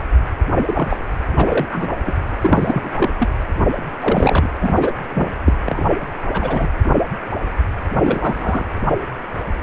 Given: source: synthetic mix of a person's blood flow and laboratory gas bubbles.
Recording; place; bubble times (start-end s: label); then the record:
Doppler ultrasound of blood flow; precordium
0.65-0.99 s: bubbles
1.36-1.94 s: bubbles
2.06-2.12 s: bubbles
2.41-3.12 s: bubbles
3.19-3.30 s: bubbles
4.00-4.50 s: bubbles
4.59-4.92 s: bubbles
5.13-5.32 s: bubbles
5.45-5.53 s: bubbles
5.66-5.86 s: bubbles
6.33-6.67 s: bubbles
7.98-8.67 s: bubbles
From the record:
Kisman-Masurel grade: 233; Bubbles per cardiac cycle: several, 3 to 8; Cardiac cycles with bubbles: 50 to 99%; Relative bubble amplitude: loud (0.450 to 0.775); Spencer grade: 3 (all of the cardiac periods contain showers or single bubble signals, but not dominating or overriding the cardiac motion signals); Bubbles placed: anywhere in the cardiac cycle